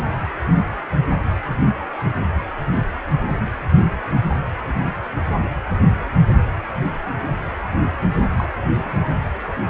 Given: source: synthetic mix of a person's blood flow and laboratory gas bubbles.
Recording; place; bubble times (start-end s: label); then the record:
Doppler ultrasound of blood flow; precordium
8.36-8.46 s: bubbles
From the record:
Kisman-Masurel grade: 112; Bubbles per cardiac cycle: 1 to 2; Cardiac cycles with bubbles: 1 to 10%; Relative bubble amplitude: moderate (0.250 to 0.450); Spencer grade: 1 (occasional bubble signal discernible with the cardiac motion signal, with majority of cardiac periods free of bubbles); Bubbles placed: anywhere in the cardiac cycle